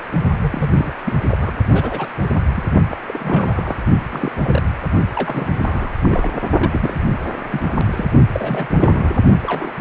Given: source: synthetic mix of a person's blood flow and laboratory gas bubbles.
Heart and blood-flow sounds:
Doppler ultrasound of blood flow; precordium
0.40-0.70 s: bubbles
0.77-0.93 s: bubbles
1.05-1.15 s: bubbles
1.29-1.38 s: bubbles
1.40-1.51 s: bubbles
1.72-2.07 s: bubbles
2.23-2.27 s: bubbles
2.54-2.64 s: bubbles
2.90-2.96 s: bubbles
3.07-3.77 s: bubbles
4.10-4.32 s: bubbles
4.42-4.62 s: bubbles
5.15-5.48 s: bubbles
5.54-5.93 s: bubbles
6.03-6.38 s: bubbles
6.60-6.99 s: bubbles
7.50-7.85 s: bubbles
7.92-8.07 s: bubbles
8.32-9.19 s: bubbles
9.43-9.71 s: bubbles
From the record:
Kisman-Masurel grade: 242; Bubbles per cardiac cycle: several, 3 to 8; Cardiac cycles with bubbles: 100%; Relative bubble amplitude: moderate (0.250 to 0.450); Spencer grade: 3 (all of the cardiac periods contain showers or single bubble signals, but not dominating or overriding the cardiac motion signals); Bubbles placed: only in the low amplitude regions of the cardiac cycle

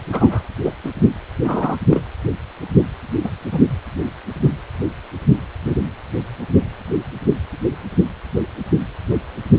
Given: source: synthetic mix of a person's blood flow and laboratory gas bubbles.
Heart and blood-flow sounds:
Doppler ultrasound of blood flow; precordium
0.12-0.42 s: bubbles
0.64-0.71 s: bubbles
0.84-0.90 s: bubbles
1.44-1.76 s: bubbles
1.90-2.04 s: bubbles
3.24-3.29 s: bubbles
3.51-3.63 s: bubbles
From the record:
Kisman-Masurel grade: 123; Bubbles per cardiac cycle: 1 to 2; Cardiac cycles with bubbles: 10 to 50%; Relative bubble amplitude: loud (0.450 to 0.775); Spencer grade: 2 (many but less than half of the cardiac periods contain bubble signals, singularly or in groups); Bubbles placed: anywhere in the cardiac cycle

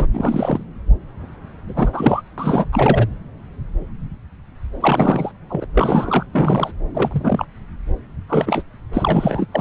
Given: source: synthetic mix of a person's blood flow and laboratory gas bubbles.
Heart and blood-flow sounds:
Doppler ultrasound of blood flow; subclavian vein
0.00-0.07 s: bubbles
0.14-0.64 s: bubbles
1.67-2.21 s: bubbles
2.38-2.65 s: bubbles
2.72-3.06 s: bubbles
4.80-5.32 s: bubbles
5.50-5.66 s: bubbles
5.75-6.26 s: bubbles
6.33-6.72 s: bubbles
6.94-7.46 s: bubbles
8.29-8.62 s: bubbles
8.93-9.46 s: bubbles
9.52-9.61 s: bubbles
From the record:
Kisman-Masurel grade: 333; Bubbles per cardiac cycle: rolling drumbeat, 9 or more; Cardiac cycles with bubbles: 50 to 99%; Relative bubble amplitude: loud (0.450 to 0.775); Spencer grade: 3 (all of the cardiac periods contain showers or single bubble signals, but not dominating or overriding the cardiac motion signals); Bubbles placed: anywhere in the cardiac cycle

